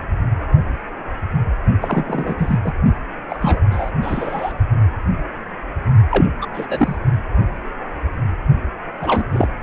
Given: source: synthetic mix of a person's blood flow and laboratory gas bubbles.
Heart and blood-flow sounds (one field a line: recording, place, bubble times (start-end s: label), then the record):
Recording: Doppler ultrasound of blood flow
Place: precordium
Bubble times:
1.81-2.36 s: bubbles
2.38-2.59 s: bubbles
2.64-2.72 s: bubbles
3.30-3.61 s: bubbles
3.71-3.91 s: bubbles
4.01-4.53 s: bubbles
6.10-6.26 s: bubbles
6.41-6.46 s: bubbles
6.54-6.67 s: bubbles
6.69-6.96 s: bubbles
9.00-9.23 s: bubbles
9.31-9.48 s: bubbles
From the record:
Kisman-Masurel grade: 233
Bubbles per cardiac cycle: several, 3 to 8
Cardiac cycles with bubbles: 50 to 99%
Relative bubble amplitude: loud (0.450 to 0.775)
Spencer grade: 3 (all of the cardiac periods contain showers or single bubble signals, but not dominating or overriding the cardiac motion signals)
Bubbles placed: only in the low amplitude regions of the cardiac cycle